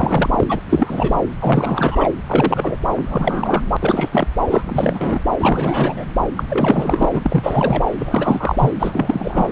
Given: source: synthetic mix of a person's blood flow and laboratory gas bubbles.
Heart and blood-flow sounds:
Doppler ultrasound of blood flow; subclavian vein
0.00-0.61 s: bubbles
0.69-1.20 s: bubbles
1.39-2.09 s: bubbles
2.27-2.77 s: bubbles
2.95-3.62 s: bubbles
3.80-4.28 s: bubbles
4.50-5.20 s: bubbles
5.40-6.05 s: bubbles
6.37-6.44 s: bubbles
6.50-7.08 s: bubbles
7.12-7.83 s: bubbles
7.98-8.71 s: bubbles
8.79-9.49 s: bubbles
From the record:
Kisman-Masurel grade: 343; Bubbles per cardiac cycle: rolling drumbeat, 9 or more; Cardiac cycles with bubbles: 100%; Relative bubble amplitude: loud (0.450 to 0.775); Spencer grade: 3 (all of the cardiac periods contain showers or single bubble signals, but not dominating or overriding the cardiac motion signals); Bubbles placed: anywhere in the cardiac cycle

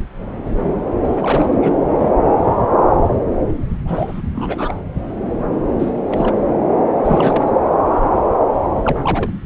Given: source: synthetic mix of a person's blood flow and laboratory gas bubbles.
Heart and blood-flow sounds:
Doppler ultrasound of blood flow; subclavian vein
1.15-1.48 s: bubbles
1.61-1.74 s: bubbles
1.89-2.11 s: bubbles
3.85-4.22 s: bubbles
4.35-4.74 s: bubbles
5.79-5.99 s: bubbles
6.08-6.35 s: bubbles
7.04-7.52 s: bubbles
8.83-9.00 s: bubbles
9.03-9.31 s: bubbles
From the record:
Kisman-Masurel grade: 222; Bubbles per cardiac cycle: several, 3 to 8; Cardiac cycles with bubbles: 10 to 50%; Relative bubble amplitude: moderate (0.250 to 0.450); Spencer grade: 2 (many but less than half of the cardiac periods contain bubble signals, singularly or in groups); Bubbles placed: anywhere in the cardiac cycle

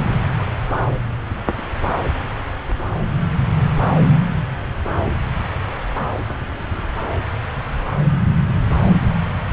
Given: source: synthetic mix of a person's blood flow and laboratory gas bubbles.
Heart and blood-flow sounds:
Doppler ultrasound of blood flow; subclavian vein
no bubbles
From the record:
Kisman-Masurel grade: 000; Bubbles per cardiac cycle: 0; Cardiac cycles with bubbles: 0%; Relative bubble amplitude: no bubbles discernible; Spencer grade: 0 (complete lack of bubble signals)

